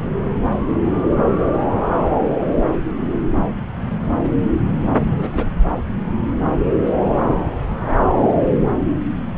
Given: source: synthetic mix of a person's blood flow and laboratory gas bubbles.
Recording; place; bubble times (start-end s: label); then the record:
Doppler ultrasound of blood flow; subclavian vein
4.99-5.49 s: bubbles
From the record:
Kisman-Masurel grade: 211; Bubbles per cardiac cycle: several, 3 to 8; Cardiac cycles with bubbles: 1 to 10%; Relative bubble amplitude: barely perceptible (0.100 to 0.250); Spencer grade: 1 (occasional bubble signal discernible with the cardiac motion signal, with majority of cardiac periods free of bubbles); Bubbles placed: anywhere in the cardiac cycle